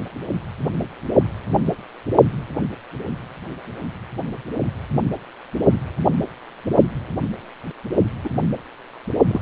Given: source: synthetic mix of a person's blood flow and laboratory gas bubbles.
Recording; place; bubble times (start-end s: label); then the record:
Doppler ultrasound of blood flow; precordium
8.24-8.29 s: bubbles
9.28-9.41 s: bubbles
From the record:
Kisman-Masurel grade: 122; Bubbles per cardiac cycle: 1 to 2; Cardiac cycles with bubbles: 10 to 50%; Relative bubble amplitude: moderate (0.250 to 0.450); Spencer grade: 2 (many but less than half of the cardiac periods contain bubble signals, singularly or in groups); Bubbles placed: only in the low amplitude regions of the cardiac cycle